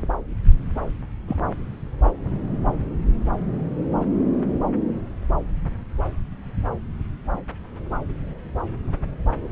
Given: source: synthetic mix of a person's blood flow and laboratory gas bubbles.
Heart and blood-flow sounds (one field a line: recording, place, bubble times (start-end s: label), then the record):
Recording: Doppler ultrasound of blood flow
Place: subclavian vein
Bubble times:
1.27-1.37 s: bubbles
2.03-2.11 s: bubbles
From the record:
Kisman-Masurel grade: 112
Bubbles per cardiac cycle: 1 to 2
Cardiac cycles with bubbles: 1 to 10%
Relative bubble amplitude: moderate (0.250 to 0.450)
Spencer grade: 1 (occasional bubble signal discernible with the cardiac motion signal, with majority of cardiac periods free of bubbles)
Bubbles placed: anywhere in the cardiac cycle